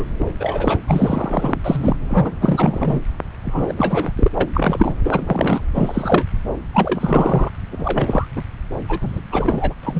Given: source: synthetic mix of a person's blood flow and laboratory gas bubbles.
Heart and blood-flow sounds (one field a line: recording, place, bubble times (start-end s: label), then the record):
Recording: Doppler ultrasound of blood flow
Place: subclavian vein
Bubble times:
0.00-0.04 s: bubbles
0.19-0.26 s: bubbles
0.40-0.79 s: bubbles
0.87-1.56 s: bubbles
1.64-1.97 s: bubbles
2.08-2.32 s: bubbles
2.40-3.01 s: bubbles
3.44-3.73 s: bubbles
3.77-4.28 s: bubbles
4.35-4.50 s: bubbles
4.54-4.94 s: bubbles
5.05-5.61 s: bubbles
5.75-6.24 s: bubbles
6.74-7.50 s: bubbles
7.71-8.26 s: bubbles
8.36-8.43 s: bubbles
8.88-9.21 s: bubbles
9.31-9.74 s: bubbles
9.83-10.00 s: bubbles
From the record:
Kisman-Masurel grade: 342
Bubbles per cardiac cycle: rolling drumbeat, 9 or more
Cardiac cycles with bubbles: 100%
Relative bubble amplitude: moderate (0.250 to 0.450)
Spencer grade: 3 (all of the cardiac periods contain showers or single bubble signals, but not dominating or overriding the cardiac motion signals)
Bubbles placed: anywhere in the cardiac cycle